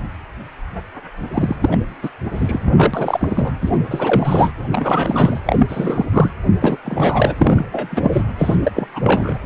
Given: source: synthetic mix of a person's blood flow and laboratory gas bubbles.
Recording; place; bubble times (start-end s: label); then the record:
Doppler ultrasound of blood flow; precordium
1.33-1.56 s: bubbles
1.60-1.78 s: bubbles
2.02-2.09 s: bubbles
2.33-3.51 s: bubbles
3.61-3.79 s: bubbles
3.90-4.53 s: bubbles
4.71-5.39 s: bubbles
5.45-6.05 s: bubbles
6.13-6.31 s: bubbles
6.60-6.76 s: bubbles
6.84-7.34 s: bubbles
7.38-8.22 s: bubbles
8.38-8.56 s: bubbles
8.64-8.72 s: bubbles
8.74-8.88 s: bubbles
8.94-9.38 s: bubbles
From the record:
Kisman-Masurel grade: 333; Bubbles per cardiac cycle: rolling drumbeat, 9 or more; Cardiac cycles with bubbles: 50 to 99%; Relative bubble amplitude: loud (0.450 to 0.775); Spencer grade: 3 (all of the cardiac periods contain showers or single bubble signals, but not dominating or overriding the cardiac motion signals); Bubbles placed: anywhere in the cardiac cycle